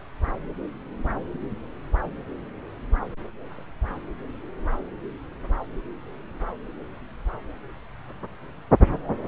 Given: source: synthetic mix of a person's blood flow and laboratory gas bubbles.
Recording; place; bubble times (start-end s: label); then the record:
Doppler ultrasound of blood flow; subclavian vein
no bubbles
From the record:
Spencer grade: 0 (complete lack of bubble signals)